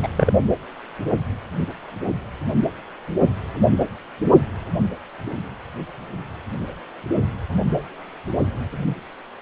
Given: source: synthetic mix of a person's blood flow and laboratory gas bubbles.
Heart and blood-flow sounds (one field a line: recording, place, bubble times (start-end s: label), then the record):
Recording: Doppler ultrasound of blood flow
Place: precordium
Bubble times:
0.02-0.08 s: bubbles
0.17-0.32 s: bubbles
From the record:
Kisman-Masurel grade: 212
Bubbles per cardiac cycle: several, 3 to 8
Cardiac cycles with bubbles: 1 to 10%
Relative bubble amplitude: moderate (0.250 to 0.450)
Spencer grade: 1 (occasional bubble signal discernible with the cardiac motion signal, with majority of cardiac periods free of bubbles)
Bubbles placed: only in the low amplitude regions of the cardiac cycle